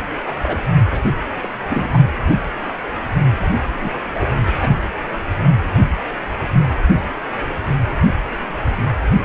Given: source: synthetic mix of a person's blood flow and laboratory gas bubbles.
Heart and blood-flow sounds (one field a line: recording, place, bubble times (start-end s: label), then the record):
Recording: Doppler ultrasound of blood flow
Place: precordium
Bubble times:
0.27-0.33 s: bubbles
0.42-0.61 s: bubbles
0.92-1.01 s: bubbles
1.04-1.08 s: bubbles
1.42-1.49 s: bubbles
1.70-2.01 s: bubbles
3.80-3.90 s: bubbles
3.94-4.00 s: bubbles
4.14-4.30 s: bubbles
4.59-4.70 s: bubbles
From the record:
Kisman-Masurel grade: 222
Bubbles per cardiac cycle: several, 3 to 8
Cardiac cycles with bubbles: 10 to 50%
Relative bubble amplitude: moderate (0.250 to 0.450)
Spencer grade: 2 (many but less than half of the cardiac periods contain bubble signals, singularly or in groups)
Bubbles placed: anywhere in the cardiac cycle